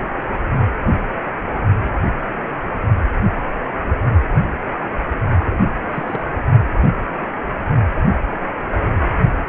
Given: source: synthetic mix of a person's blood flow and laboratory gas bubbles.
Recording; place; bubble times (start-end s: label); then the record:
Doppler ultrasound of blood flow; precordium
5.46-5.73 s: bubbles
5.89-6.23 s: bubbles
From the record:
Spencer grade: 1 (occasional bubble signal discernible with the cardiac motion signal, with majority of cardiac periods free of bubbles); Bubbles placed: only in the low amplitude regions of the cardiac cycle